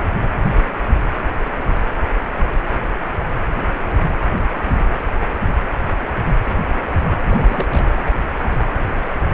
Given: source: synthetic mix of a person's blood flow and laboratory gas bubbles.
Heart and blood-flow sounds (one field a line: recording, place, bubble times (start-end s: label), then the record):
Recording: Doppler ultrasound of blood flow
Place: precordium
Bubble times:
7.27-7.66 s: bubbles
7.71-7.86 s: bubbles
From the record:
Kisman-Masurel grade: 211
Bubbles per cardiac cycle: several, 3 to 8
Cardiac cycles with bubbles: 1 to 10%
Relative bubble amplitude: barely perceptible (0.100 to 0.250)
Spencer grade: 1 (occasional bubble signal discernible with the cardiac motion signal, with majority of cardiac periods free of bubbles)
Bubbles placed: anywhere in the cardiac cycle